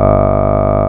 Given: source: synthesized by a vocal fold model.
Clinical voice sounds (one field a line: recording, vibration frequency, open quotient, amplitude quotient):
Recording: sustained vowel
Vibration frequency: 50 Hz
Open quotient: 0.4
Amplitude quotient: 1.3